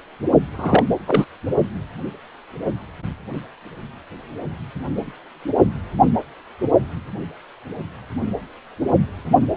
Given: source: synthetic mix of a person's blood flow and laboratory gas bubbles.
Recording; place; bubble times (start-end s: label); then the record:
Doppler ultrasound of blood flow; precordium
0.57-0.83 s: bubbles
1.06-1.25 s: bubbles
From the record:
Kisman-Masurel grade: 223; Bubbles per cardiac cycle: several, 3 to 8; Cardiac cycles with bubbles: 10 to 50%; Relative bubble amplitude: loud (0.450 to 0.775); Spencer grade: 2 (many but less than half of the cardiac periods contain bubble signals, singularly or in groups); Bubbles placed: only in the low amplitude regions of the cardiac cycle